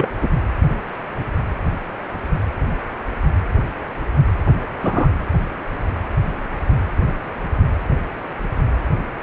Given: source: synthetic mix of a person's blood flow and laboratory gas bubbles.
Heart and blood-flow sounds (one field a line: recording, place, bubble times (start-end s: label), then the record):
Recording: Doppler ultrasound of blood flow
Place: precordium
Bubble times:
0.00-0.08 s: bubbles
0.21-0.28 s: bubbles
4.83-5.08 s: bubbles
From the record:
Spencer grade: 2 (many but less than half of the cardiac periods contain bubble signals, singularly or in groups)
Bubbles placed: anywhere in the cardiac cycle